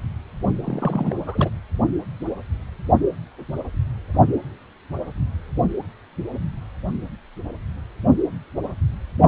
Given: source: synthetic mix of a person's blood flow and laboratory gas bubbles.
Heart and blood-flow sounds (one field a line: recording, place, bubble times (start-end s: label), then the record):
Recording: Doppler ultrasound of blood flow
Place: precordium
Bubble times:
0.64-1.49 s: bubbles
From the record:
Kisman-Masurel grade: 212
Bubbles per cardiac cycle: several, 3 to 8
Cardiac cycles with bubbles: 1 to 10%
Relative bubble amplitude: moderate (0.250 to 0.450)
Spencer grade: 1 (occasional bubble signal discernible with the cardiac motion signal, with majority of cardiac periods free of bubbles)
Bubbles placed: only in the low amplitude regions of the cardiac cycle